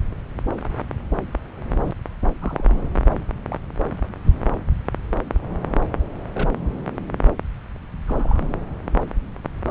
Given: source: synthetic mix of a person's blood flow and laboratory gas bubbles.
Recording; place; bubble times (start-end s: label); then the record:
Doppler ultrasound of blood flow; subclavian vein
2.41-2.77 s: bubbles
3.49-3.58 s: bubbles
6.33-6.50 s: bubbles
8.07-8.46 s: bubbles
From the record:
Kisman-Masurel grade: 121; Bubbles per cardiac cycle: 1 to 2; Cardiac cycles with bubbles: 10 to 50%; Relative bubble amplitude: barely perceptible (0.100 to 0.250); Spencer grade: 2 (many but less than half of the cardiac periods contain bubble signals, singularly or in groups); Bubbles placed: anywhere in the cardiac cycle